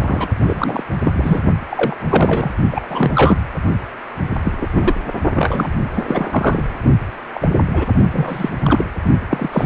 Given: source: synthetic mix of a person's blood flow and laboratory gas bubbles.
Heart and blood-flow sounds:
Doppler ultrasound of blood flow; precordium
0.01-0.28 s: bubbles
0.39-0.83 s: bubbles
1.04-1.42 s: bubbles
1.69-1.97 s: bubbles
2.00-2.51 s: bubbles
2.70-2.86 s: bubbles
2.90-3.11 s: bubbles
3.15-3.37 s: bubbles
4.44-4.69 s: bubbles
4.72-4.94 s: bubbles
5.35-5.69 s: bubbles
5.96-6.63 s: bubbles
7.34-7.48 s: bubbles
7.74-7.86 s: bubbles
8.12-8.49 s: bubbles
8.59-8.85 s: bubbles
9.29-9.49 s: bubbles
9.52-9.66 s: bubbles
From the record:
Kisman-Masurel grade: 243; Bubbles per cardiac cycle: several, 3 to 8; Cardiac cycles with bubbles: 100%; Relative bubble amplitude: loud (0.450 to 0.775); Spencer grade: 3 (all of the cardiac periods contain showers or single bubble signals, but not dominating or overriding the cardiac motion signals); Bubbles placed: only in the low amplitude regions of the cardiac cycle

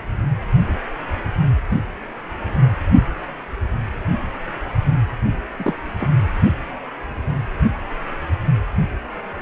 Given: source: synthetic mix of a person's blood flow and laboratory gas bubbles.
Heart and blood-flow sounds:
Doppler ultrasound of blood flow; precordium
5.58-5.73 s: bubbles
5.98-6.09 s: bubbles
From the record:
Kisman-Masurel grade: 112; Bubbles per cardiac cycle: 1 to 2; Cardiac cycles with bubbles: 1 to 10%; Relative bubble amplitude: moderate (0.250 to 0.450); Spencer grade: 1 (occasional bubble signal discernible with the cardiac motion signal, with majority of cardiac periods free of bubbles); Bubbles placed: only in the low amplitude regions of the cardiac cycle

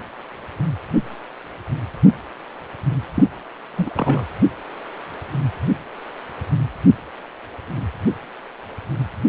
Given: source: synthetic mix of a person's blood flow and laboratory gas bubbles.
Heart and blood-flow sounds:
Doppler ultrasound of blood flow; precordium
3.14-3.24 s: bubbles
3.77-3.90 s: bubbles
3.93-4.26 s: bubbles
From the record:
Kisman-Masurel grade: 212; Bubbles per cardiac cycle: several, 3 to 8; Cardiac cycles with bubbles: 1 to 10%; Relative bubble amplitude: moderate (0.250 to 0.450); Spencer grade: 1 (occasional bubble signal discernible with the cardiac motion signal, with majority of cardiac periods free of bubbles); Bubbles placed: anywhere in the cardiac cycle

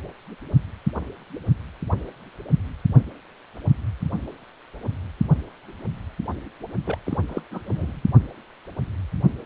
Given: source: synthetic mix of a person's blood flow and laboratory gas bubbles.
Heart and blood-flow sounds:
Doppler ultrasound of blood flow; precordium
6.85-6.98 s: bubbles
7.06-7.17 s: bubbles
7.28-7.42 s: bubbles
7.51-7.60 s: bubbles
7.66-8.03 s: bubbles
From the record:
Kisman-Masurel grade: 211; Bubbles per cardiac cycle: several, 3 to 8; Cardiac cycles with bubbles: 1 to 10%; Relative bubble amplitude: barely perceptible (0.100 to 0.250); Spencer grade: 1 (occasional bubble signal discernible with the cardiac motion signal, with majority of cardiac periods free of bubbles); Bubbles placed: only in the low amplitude regions of the cardiac cycle

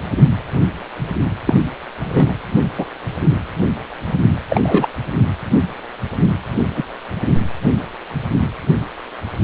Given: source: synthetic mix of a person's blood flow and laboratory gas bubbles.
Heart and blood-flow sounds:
Doppler ultrasound of blood flow; precordium
1.45-1.55 s: bubbles
1.99-2.33 s: bubbles
2.78-2.86 s: bubbles
4.50-4.87 s: bubbles
6.76-6.84 s: bubbles
From the record:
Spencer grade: 2 (many but less than half of the cardiac periods contain bubble signals, singularly or in groups); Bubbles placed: anywhere in the cardiac cycle

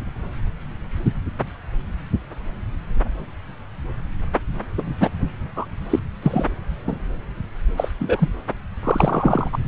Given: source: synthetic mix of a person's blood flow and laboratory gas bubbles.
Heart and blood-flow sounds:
Doppler ultrasound of blood flow; subclavian vein
4.78-4.83 s: bubbles
5.00-5.09 s: bubbles
5.55-5.66 s: bubbles
5.90-6.00 s: bubbles
6.22-6.46 s: bubbles
6.87-6.96 s: bubbles
7.77-7.88 s: bubbles
8.00-8.29 s: bubbles
8.84-9.50 s: bubbles
9.53-9.58 s: bubbles
9.64-9.68 s: bubbles
From the record:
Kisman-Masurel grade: 233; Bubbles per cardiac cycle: several, 3 to 8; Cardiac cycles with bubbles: 50 to 99%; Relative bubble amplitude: loud (0.450 to 0.775); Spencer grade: 3 (all of the cardiac periods contain showers or single bubble signals, but not dominating or overriding the cardiac motion signals); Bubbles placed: anywhere in the cardiac cycle

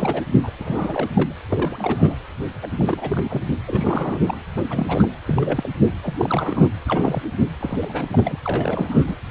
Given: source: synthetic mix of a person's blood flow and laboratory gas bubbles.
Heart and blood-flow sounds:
Doppler ultrasound of blood flow; precordium
0.00-0.22 s: bubbles
0.43-0.52 s: bubbles
0.58-1.09 s: bubbles
1.15-1.32 s: bubbles
1.49-2.14 s: bubbles
2.62-2.67 s: bubbles
2.77-3.42 s: bubbles
3.67-4.42 s: bubbles
4.56-5.09 s: bubbles
5.26-5.69 s: bubbles
5.87-5.94 s: bubbles
6.03-6.13 s: bubbles
6.17-6.68 s: bubbles
6.88-7.22 s: bubbles
7.60-8.38 s: bubbles
8.45-9.15 s: bubbles
From the record:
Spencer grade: 3 (all of the cardiac periods contain showers or single bubble signals, but not dominating or overriding the cardiac motion signals); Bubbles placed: anywhere in the cardiac cycle

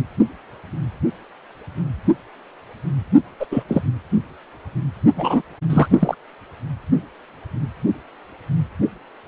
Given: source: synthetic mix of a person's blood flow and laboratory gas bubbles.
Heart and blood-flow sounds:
Doppler ultrasound of blood flow; precordium
3.39-3.46 s: bubbles
3.51-3.63 s: bubbles
3.68-3.82 s: bubbles
5.15-5.42 s: bubbles
5.70-6.14 s: bubbles
From the record:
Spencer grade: 2 (many but less than half of the cardiac periods contain bubble signals, singularly or in groups); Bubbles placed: anywhere in the cardiac cycle

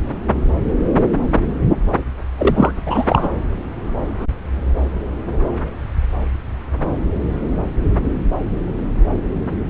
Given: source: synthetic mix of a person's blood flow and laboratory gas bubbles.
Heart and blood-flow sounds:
Doppler ultrasound of blood flow; subclavian vein
2.38-2.71 s: bubbles
2.85-3.30 s: bubbles
From the record:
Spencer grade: 1 (occasional bubble signal discernible with the cardiac motion signal, with majority of cardiac periods free of bubbles); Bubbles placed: anywhere in the cardiac cycle

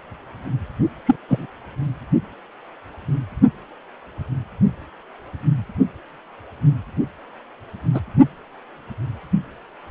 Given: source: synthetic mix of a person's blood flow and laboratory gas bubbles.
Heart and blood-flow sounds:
Doppler ultrasound of blood flow; precordium
1.06-1.17 s: bubbles
1.28-1.46 s: bubbles
7.94-8.00 s: bubbles
From the record:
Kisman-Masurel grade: 123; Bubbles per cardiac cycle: 1 to 2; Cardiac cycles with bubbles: 10 to 50%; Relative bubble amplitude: loud (0.450 to 0.775); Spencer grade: 2 (many but less than half of the cardiac periods contain bubble signals, singularly or in groups); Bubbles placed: only in the low amplitude regions of the cardiac cycle

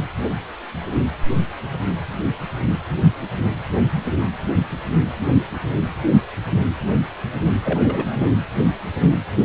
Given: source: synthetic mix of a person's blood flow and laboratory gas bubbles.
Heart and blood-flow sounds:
Doppler ultrasound of blood flow; precordium
7.64-8.41 s: bubbles
From the record:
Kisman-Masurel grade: 211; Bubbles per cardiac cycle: several, 3 to 8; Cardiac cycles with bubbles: 1 to 10%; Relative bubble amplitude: barely perceptible (0.100 to 0.250); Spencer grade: 1 (occasional bubble signal discernible with the cardiac motion signal, with majority of cardiac periods free of bubbles); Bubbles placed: anywhere in the cardiac cycle

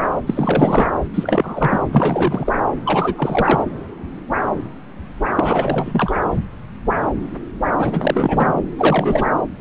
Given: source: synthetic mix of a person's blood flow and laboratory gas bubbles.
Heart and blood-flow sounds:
Doppler ultrasound of blood flow; subclavian vein
0.27-0.89 s: bubbles
1.14-1.81 s: bubbles
1.91-2.52 s: bubbles
2.85-3.15 s: bubbles
3.17-3.64 s: bubbles
5.37-6.17 s: bubbles
7.79-8.59 s: bubbles
8.77-9.27 s: bubbles
From the record:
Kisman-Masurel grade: 333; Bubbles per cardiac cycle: rolling drumbeat, 9 or more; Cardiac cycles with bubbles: 50 to 99%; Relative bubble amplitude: loud (0.450 to 0.775); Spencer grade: 3 (all of the cardiac periods contain showers or single bubble signals, but not dominating or overriding the cardiac motion signals); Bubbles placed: anywhere in the cardiac cycle

